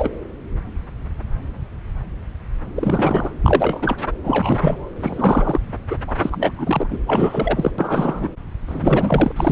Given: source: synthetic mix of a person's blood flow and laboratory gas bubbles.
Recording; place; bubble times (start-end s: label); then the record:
Doppler ultrasound of blood flow; subclavian vein
0.00-0.10 s: bubbles
2.75-3.31 s: bubbles
3.44-3.96 s: bubbles
4.24-4.88 s: bubbles
4.96-5.60 s: bubbles
5.90-5.95 s: bubbles
6.07-6.12 s: bubbles
6.20-6.51 s: bubbles
6.56-6.87 s: bubbles
6.90-6.99 s: bubbles
7.07-7.72 s: bubbles
7.78-8.28 s: bubbles
8.67-9.32 s: bubbles
9.36-9.52 s: bubbles
From the record:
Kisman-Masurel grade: 333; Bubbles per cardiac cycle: rolling drumbeat, 9 or more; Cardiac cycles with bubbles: 50 to 99%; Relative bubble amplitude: loud (0.450 to 0.775); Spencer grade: 3 (all of the cardiac periods contain showers or single bubble signals, but not dominating or overriding the cardiac motion signals); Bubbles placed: anywhere in the cardiac cycle